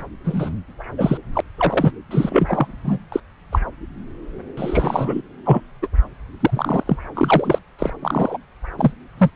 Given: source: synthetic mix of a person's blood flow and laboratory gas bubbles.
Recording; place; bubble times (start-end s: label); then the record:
Doppler ultrasound of blood flow; subclavian vein
0.24-0.49 s: bubbles
0.98-1.18 s: bubbles
1.33-1.41 s: bubbles
1.57-1.92 s: bubbles
2.10-2.67 s: bubbles
2.84-2.98 s: bubbles
3.12-3.20 s: bubbles
3.52-3.59 s: bubbles
4.57-5.22 s: bubbles
5.44-5.60 s: bubbles
5.82-5.88 s: bubbles
6.40-6.96 s: bubbles
7.14-7.58 s: bubbles
7.78-7.90 s: bubbles
8.02-8.37 s: bubbles
8.78-8.92 s: bubbles
9.18-9.30 s: bubbles
From the record:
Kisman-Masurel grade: 233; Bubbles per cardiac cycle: several, 3 to 8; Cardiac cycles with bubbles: 50 to 99%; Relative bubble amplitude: loud (0.450 to 0.775); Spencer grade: 3 (all of the cardiac periods contain showers or single bubble signals, but not dominating or overriding the cardiac motion signals); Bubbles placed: anywhere in the cardiac cycle